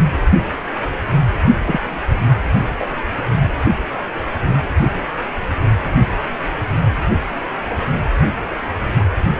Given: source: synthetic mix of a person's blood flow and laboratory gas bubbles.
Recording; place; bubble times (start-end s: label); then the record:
Doppler ultrasound of blood flow; precordium
1.64-1.80 s: bubbles
2.79-3.01 s: bubbles
From the record:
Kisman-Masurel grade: 122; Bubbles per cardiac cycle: 1 to 2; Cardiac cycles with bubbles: 10 to 50%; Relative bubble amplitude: moderate (0.250 to 0.450); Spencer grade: 2 (many but less than half of the cardiac periods contain bubble signals, singularly or in groups); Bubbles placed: only in the low amplitude regions of the cardiac cycle